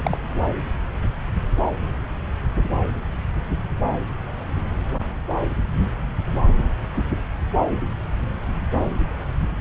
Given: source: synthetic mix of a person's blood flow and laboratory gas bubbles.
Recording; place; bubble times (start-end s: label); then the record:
Doppler ultrasound of blood flow; subclavian vein
0.00-0.19 s: bubbles
From the record:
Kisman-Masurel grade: 212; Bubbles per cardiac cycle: several, 3 to 8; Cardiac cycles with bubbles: 1 to 10%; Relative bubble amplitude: moderate (0.250 to 0.450); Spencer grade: 1 (occasional bubble signal discernible with the cardiac motion signal, with majority of cardiac periods free of bubbles); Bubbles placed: anywhere in the cardiac cycle